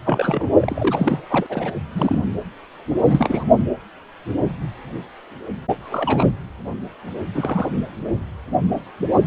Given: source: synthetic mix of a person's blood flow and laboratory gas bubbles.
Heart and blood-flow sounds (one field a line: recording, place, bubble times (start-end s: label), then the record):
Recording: Doppler ultrasound of blood flow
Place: precordium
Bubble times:
0.05-0.48 s: bubbles
0.60-1.18 s: bubbles
1.29-1.46 s: bubbles
1.49-1.72 s: bubbles
1.95-2.24 s: bubbles
3.04-3.44 s: bubbles
5.82-6.32 s: bubbles
7.34-7.69 s: bubbles
9.24-9.27 s: bubbles
From the record:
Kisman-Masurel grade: 232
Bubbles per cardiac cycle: several, 3 to 8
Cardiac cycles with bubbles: 50 to 99%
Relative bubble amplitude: moderate (0.250 to 0.450)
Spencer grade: 3 (all of the cardiac periods contain showers or single bubble signals, but not dominating or overriding the cardiac motion signals)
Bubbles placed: anywhere in the cardiac cycle